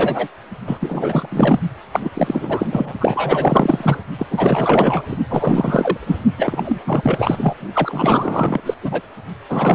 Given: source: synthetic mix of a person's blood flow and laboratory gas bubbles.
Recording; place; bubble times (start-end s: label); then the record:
Doppler ultrasound of blood flow; precordium
0.00-0.28 s: bubbles
0.67-1.27 s: bubbles
1.31-1.59 s: bubbles
1.92-2.10 s: bubbles
2.13-2.93 s: bubbles
3.00-3.99 s: bubbles
4.18-4.27 s: bubbles
4.30-5.02 s: bubbles
5.08-5.19 s: bubbles
5.29-5.97 s: bubbles
6.06-6.16 s: bubbles
6.38-6.79 s: bubbles
6.86-7.54 s: bubbles
7.73-8.60 s: bubbles
8.66-8.74 s: bubbles
8.82-9.02 s: bubbles
9.49-9.75 s: bubbles
From the record:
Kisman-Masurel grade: 444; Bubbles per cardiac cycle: continuous sound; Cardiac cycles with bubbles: 100%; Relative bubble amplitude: maximal (0.775 to 0.999); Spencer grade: 4 (maximum detectable bubble signal sounding continuously throughout systole and diastole of every cardiac period, and overriding the amplitude of the normal cardiac signals); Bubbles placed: only in the low amplitude regions of the cardiac cycle